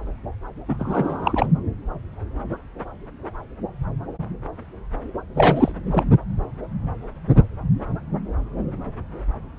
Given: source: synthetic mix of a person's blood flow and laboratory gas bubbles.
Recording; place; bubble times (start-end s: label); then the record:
Doppler ultrasound of blood flow; subclavian vein
0.69-1.46 s: bubbles
5.35-5.71 s: bubbles
5.85-6.04 s: bubbles
From the record:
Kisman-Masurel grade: 222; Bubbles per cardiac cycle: several, 3 to 8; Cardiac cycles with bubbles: 10 to 50%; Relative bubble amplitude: moderate (0.250 to 0.450); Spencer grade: 2 (many but less than half of the cardiac periods contain bubble signals, singularly or in groups); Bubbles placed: anywhere in the cardiac cycle